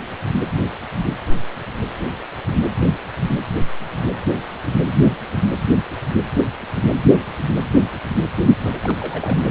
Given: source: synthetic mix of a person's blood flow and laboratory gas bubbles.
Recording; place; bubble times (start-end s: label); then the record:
Doppler ultrasound of blood flow; precordium
8.65-8.97 s: bubbles
9.00-9.51 s: bubbles
From the record:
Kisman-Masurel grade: 211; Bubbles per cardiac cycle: several, 3 to 8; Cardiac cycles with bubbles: 1 to 10%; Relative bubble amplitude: barely perceptible (0.100 to 0.250); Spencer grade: 1 (occasional bubble signal discernible with the cardiac motion signal, with majority of cardiac periods free of bubbles); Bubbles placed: anywhere in the cardiac cycle